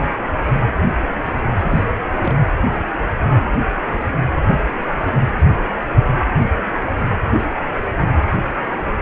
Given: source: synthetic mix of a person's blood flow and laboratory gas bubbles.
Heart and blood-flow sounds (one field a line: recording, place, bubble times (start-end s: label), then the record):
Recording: Doppler ultrasound of blood flow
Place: precordium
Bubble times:
1.59-1.83 s: bubbles
2.23-2.35 s: bubbles
7.24-7.30 s: bubbles
From the record:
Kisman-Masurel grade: 122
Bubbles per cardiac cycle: 1 to 2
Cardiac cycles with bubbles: 10 to 50%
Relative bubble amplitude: moderate (0.250 to 0.450)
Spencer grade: 2 (many but less than half of the cardiac periods contain bubble signals, singularly or in groups)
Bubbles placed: anywhere in the cardiac cycle